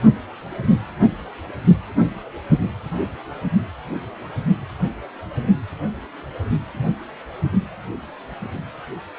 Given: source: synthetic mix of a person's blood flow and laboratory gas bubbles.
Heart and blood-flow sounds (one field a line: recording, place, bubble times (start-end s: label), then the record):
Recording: Doppler ultrasound of blood flow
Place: precordium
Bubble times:
no bubbles
From the record:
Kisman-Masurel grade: 000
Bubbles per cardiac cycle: 0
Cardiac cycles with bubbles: 0%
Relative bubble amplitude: no bubbles discernible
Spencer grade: 0 (complete lack of bubble signals)